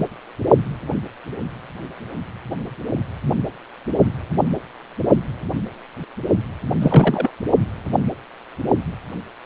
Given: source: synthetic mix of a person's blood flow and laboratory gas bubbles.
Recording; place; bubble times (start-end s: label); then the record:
Doppler ultrasound of blood flow; precordium
6.80-7.30 s: bubbles
From the record:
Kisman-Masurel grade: 213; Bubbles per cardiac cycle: several, 3 to 8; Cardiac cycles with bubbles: 1 to 10%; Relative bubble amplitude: loud (0.450 to 0.775); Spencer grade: 1 (occasional bubble signal discernible with the cardiac motion signal, with majority of cardiac periods free of bubbles); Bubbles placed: only in the low amplitude regions of the cardiac cycle